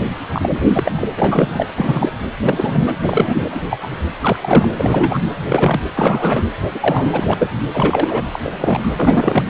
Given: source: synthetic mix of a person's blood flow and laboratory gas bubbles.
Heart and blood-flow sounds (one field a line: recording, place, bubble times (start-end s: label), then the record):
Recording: Doppler ultrasound of blood flow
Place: precordium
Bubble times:
0.00-0.04 s: bubbles
0.32-0.62 s: bubbles
0.75-0.92 s: bubbles
0.96-1.08 s: bubbles
1.17-1.66 s: bubbles
1.75-2.10 s: bubbles
2.42-2.94 s: bubbles
3.03-3.50 s: bubbles
3.54-3.61 s: bubbles
3.70-4.01 s: bubbles
4.21-4.69 s: bubbles
4.78-5.19 s: bubbles
5.49-5.80 s: bubbles
5.95-6.45 s: bubbles
6.74-7.50 s: bubbles
7.73-8.25 s: bubbles
8.32-8.39 s: bubbles
8.43-8.91 s: bubbles
8.96-9.49 s: bubbles
From the record:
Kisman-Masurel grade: 243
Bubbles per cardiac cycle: several, 3 to 8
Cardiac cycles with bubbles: 100%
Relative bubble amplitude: loud (0.450 to 0.775)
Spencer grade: 3 (all of the cardiac periods contain showers or single bubble signals, but not dominating or overriding the cardiac motion signals)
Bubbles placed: anywhere in the cardiac cycle